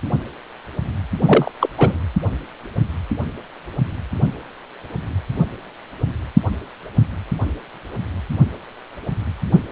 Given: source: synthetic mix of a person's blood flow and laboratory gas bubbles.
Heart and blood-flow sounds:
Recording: Doppler ultrasound of blood flow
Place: precordium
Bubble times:
1.25-1.51 s: bubbles
1.60-1.69 s: bubbles
1.77-1.99 s: bubbles
From the record:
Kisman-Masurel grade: 223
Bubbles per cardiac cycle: several, 3 to 8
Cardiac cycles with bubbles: 10 to 50%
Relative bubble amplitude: loud (0.450 to 0.775)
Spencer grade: 2 (many but less than half of the cardiac periods contain bubble signals, singularly or in groups)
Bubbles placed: only in the low amplitude regions of the cardiac cycle

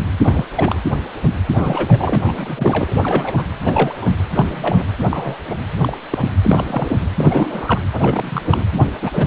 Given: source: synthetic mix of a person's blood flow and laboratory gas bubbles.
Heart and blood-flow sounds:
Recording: Doppler ultrasound of blood flow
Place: precordium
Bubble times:
0.23-0.43 s: bubbles
0.55-0.80 s: bubbles
1.56-2.17 s: bubbles
2.24-2.94 s: bubbles
3.03-3.33 s: bubbles
3.36-3.45 s: bubbles
3.60-4.06 s: bubbles
4.35-4.86 s: bubbles
5.09-5.36 s: bubbles
5.50-5.55 s: bubbles
5.81-5.97 s: bubbles
6.10-6.30 s: bubbles
6.41-6.64 s: bubbles
6.68-6.96 s: bubbles
7.17-7.81 s: bubbles
7.92-8.63 s: bubbles
8.72-8.86 s: bubbles
9.01-9.26 s: bubbles
From the record:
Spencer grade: 3 (all of the cardiac periods contain showers or single bubble signals, but not dominating or overriding the cardiac motion signals)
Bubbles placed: anywhere in the cardiac cycle

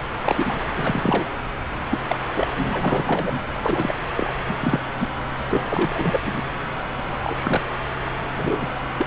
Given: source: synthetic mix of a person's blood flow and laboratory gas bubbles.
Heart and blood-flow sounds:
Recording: Doppler ultrasound of blood flow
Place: subclavian vein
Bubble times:
0.00-0.02 s: bubbles
0.24-0.58 s: bubbles
0.76-1.26 s: bubbles
1.91-2.00 s: bubbles
2.08-2.16 s: bubbles
2.34-2.48 s: bubbles
2.58-3.40 s: bubbles
3.62-3.93 s: bubbles
4.17-4.33 s: bubbles
4.48-4.54 s: bubbles
4.61-4.79 s: bubbles
5.00-5.08 s: bubbles
5.50-5.64 s: bubbles
5.68-6.18 s: bubbles
6.21-6.51 s: bubbles
7.23-7.61 s: bubbles
8.32-8.71 s: bubbles
8.98-9.07 s: bubbles
From the record:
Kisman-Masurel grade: 242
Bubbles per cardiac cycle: several, 3 to 8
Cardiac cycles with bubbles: 100%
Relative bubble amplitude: moderate (0.250 to 0.450)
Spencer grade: 3 (all of the cardiac periods contain showers or single bubble signals, but not dominating or overriding the cardiac motion signals)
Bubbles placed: anywhere in the cardiac cycle

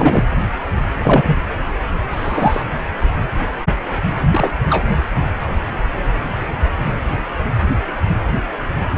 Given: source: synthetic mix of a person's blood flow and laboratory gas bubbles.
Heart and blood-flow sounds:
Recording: Doppler ultrasound of blood flow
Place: precordium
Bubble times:
0.00-0.23 s: bubbles
0.99-1.36 s: bubbles
2.12-2.62 s: bubbles
4.30-4.52 s: bubbles
4.70-4.84 s: bubbles
From the record:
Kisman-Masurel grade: 223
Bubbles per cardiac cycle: several, 3 to 8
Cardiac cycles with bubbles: 10 to 50%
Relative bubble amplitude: loud (0.450 to 0.775)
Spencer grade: 2 (many but less than half of the cardiac periods contain bubble signals, singularly or in groups)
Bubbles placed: anywhere in the cardiac cycle

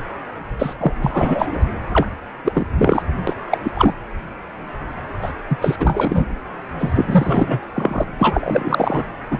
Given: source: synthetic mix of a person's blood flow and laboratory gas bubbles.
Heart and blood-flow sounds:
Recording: Doppler ultrasound of blood flow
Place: precordium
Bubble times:
0.58-0.75 s: bubbles
0.80-0.93 s: bubbles
1.00-1.62 s: bubbles
1.93-2.07 s: bubbles
2.45-2.66 s: bubbles
2.77-3.02 s: bubbles
3.27-3.35 s: bubbles
3.51-3.58 s: bubbles
3.64-3.71 s: bubbles
3.75-3.93 s: bubbles
5.22-5.32 s: bubbles
5.49-5.58 s: bubbles
5.61-5.76 s: bubbles
5.79-6.26 s: bubbles
6.79-7.62 s: bubbles
7.73-8.04 s: bubbles
8.18-9.06 s: bubbles
9.31-9.40 s: bubbles
From the record:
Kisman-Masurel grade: 333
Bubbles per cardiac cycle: rolling drumbeat, 9 or more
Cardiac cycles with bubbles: 50 to 99%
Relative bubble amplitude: loud (0.450 to 0.775)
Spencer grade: 3 (all of the cardiac periods contain showers or single bubble signals, but not dominating or overriding the cardiac motion signals)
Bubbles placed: anywhere in the cardiac cycle

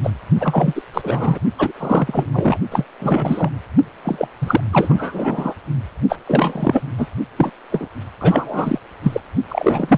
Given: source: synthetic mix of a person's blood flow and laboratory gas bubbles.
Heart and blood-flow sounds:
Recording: Doppler ultrasound of blood flow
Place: precordium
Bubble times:
0.03-0.10 s: bubbles
0.40-0.82 s: bubbles
0.93-1.39 s: bubbles
1.58-1.72 s: bubbles
1.74-2.25 s: bubbles
2.32-2.58 s: bubbles
2.71-2.85 s: bubbles
2.99-3.50 s: bubbles
4.05-4.28 s: bubbles
4.41-4.61 s: bubbles
4.72-5.54 s: bubbles
6.09-6.17 s: bubbles
6.27-6.83 s: bubbles
6.98-7.08 s: bubbles
7.37-7.52 s: bubbles
7.72-7.89 s: bubbles
8.20-8.79 s: bubbles
9.03-9.21 s: bubbles
9.48-9.98 s: bubbles
From the record:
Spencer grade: 3 (all of the cardiac periods contain showers or single bubble signals, but not dominating or overriding the cardiac motion signals)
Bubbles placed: only in the low amplitude regions of the cardiac cycle

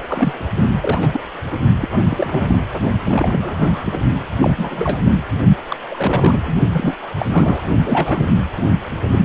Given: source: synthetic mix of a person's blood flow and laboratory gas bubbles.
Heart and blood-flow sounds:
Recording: Doppler ultrasound of blood flow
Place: precordium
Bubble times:
0.01-0.46 s: bubbles
0.56-0.61 s: bubbles
0.80-1.20 s: bubbles
1.51-1.58 s: bubbles
1.80-2.00 s: bubbles
2.09-2.60 s: bubbles
3.00-4.00 s: bubbles
4.39-4.54 s: bubbles
4.58-5.00 s: bubbles
5.04-5.12 s: bubbles
5.68-5.76 s: bubbles
5.90-6.38 s: bubbles
6.45-6.54 s: bubbles
6.72-6.95 s: bubbles
7.18-7.62 s: bubbles
7.86-8.32 s: bubbles
8.56-8.62 s: bubbles
8.94-9.25 s: bubbles
From the record:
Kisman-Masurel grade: 342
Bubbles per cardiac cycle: rolling drumbeat, 9 or more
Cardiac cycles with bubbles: 100%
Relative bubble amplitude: moderate (0.250 to 0.450)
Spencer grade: 3 (all of the cardiac periods contain showers or single bubble signals, but not dominating or overriding the cardiac motion signals)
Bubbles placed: only in the low amplitude regions of the cardiac cycle

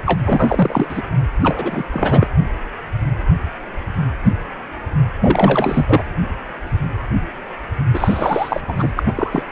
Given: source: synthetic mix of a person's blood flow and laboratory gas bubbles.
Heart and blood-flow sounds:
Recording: Doppler ultrasound of blood flow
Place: precordium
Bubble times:
0.05-0.21 s: bubbles
0.25-1.02 s: bubbles
1.43-1.84 s: bubbles
1.91-2.27 s: bubbles
5.21-6.02 s: bubbles
7.93-8.61 s: bubbles
8.68-8.92 s: bubbles
8.95-9.03 s: bubbles
9.06-9.43 s: bubbles
From the record:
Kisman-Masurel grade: 333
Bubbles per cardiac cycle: rolling drumbeat, 9 or more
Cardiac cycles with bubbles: 50 to 99%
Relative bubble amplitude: loud (0.450 to 0.775)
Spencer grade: 3 (all of the cardiac periods contain showers or single bubble signals, but not dominating or overriding the cardiac motion signals)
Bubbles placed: anywhere in the cardiac cycle

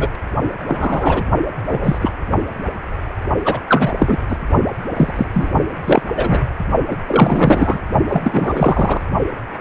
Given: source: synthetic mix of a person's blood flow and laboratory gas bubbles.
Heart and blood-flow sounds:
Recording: Doppler ultrasound of blood flow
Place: precordium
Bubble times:
0.00-0.09 s: bubbles
0.67-1.23 s: bubbles
1.68-1.98 s: bubbles
2.01-2.09 s: bubbles
3.45-3.60 s: bubbles
3.67-3.93 s: bubbles
3.97-4.19 s: bubbles
4.29-4.37 s: bubbles
4.96-5.12 s: bubbles
5.16-5.26 s: bubbles
5.33-5.50 s: bubbles
5.85-6.02 s: bubbles
6.16-6.46 s: bubbles
6.89-6.98 s: bubbles
7.07-7.80 s: bubbles
8.08-9.01 s: bubbles
From the record:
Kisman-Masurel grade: 233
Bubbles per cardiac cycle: several, 3 to 8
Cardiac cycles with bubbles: 50 to 99%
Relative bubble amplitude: loud (0.450 to 0.775)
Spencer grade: 3 (all of the cardiac periods contain showers or single bubble signals, but not dominating or overriding the cardiac motion signals)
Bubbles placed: only in the low amplitude regions of the cardiac cycle

